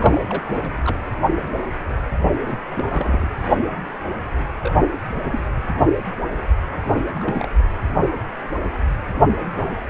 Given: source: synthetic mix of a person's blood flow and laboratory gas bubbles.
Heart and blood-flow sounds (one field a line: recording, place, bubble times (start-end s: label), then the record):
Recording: Doppler ultrasound of blood flow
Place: precordium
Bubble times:
0.00-0.20 s: bubbles
0.29-0.42 s: bubbles
0.46-0.81 s: bubbles
0.85-0.99 s: bubbles
2.10-2.17 s: bubbles
2.31-2.65 s: bubbles
2.71-3.27 s: bubbles
4.61-4.75 s: bubbles
4.80-4.88 s: bubbles
5.27-5.41 s: bubbles
6.86-7.06 s: bubbles
7.16-7.49 s: bubbles
From the record:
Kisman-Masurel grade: 221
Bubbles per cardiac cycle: several, 3 to 8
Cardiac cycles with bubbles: 10 to 50%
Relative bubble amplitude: barely perceptible (0.100 to 0.250)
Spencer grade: 2 (many but less than half of the cardiac periods contain bubble signals, singularly or in groups)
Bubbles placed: anywhere in the cardiac cycle